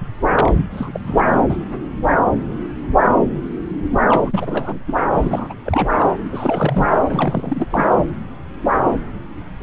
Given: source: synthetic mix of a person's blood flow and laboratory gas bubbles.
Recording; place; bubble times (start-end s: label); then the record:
Doppler ultrasound of blood flow; subclavian vein
0.33-0.52 s: bubbles
0.56-0.66 s: bubbles
0.71-1.00 s: bubbles
1.06-1.31 s: bubbles
1.48-1.57 s: bubbles
4.08-4.79 s: bubbles
4.87-4.95 s: bubbles
5.15-5.54 s: bubbles
5.65-6.04 s: bubbles
6.32-6.87 s: bubbles
7.09-7.66 s: bubbles
7.70-7.88 s: bubbles
From the record:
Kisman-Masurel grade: 332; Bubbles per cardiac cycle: rolling drumbeat, 9 or more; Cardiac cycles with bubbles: 50 to 99%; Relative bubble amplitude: moderate (0.250 to 0.450); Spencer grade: 3 (all of the cardiac periods contain showers or single bubble signals, but not dominating or overriding the cardiac motion signals); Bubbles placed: anywhere in the cardiac cycle